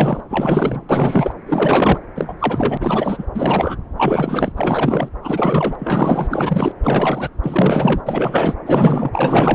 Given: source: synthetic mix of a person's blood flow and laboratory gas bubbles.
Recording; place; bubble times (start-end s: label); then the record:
Doppler ultrasound of blood flow; subclavian vein
0.00-0.23 s: bubbles
0.29-0.85 s: bubbles
0.89-1.34 s: bubbles
1.46-1.98 s: bubbles
2.15-2.34 s: bubbles
2.39-3.27 s: bubbles
3.34-3.77 s: bubbles
3.96-4.52 s: bubbles
4.57-5.08 s: bubbles
5.22-5.75 s: bubbles
5.78-6.27 s: bubbles
6.29-6.72 s: bubbles
6.83-7.29 s: bubbles
7.42-8.01 s: bubbles
8.07-8.54 s: bubbles
8.66-9.55 s: bubbles
From the record:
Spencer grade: 4 (maximum detectable bubble signal sounding continuously throughout systole and diastole of every cardiac period, and overriding the amplitude of the normal cardiac signals); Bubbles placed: anywhere in the cardiac cycle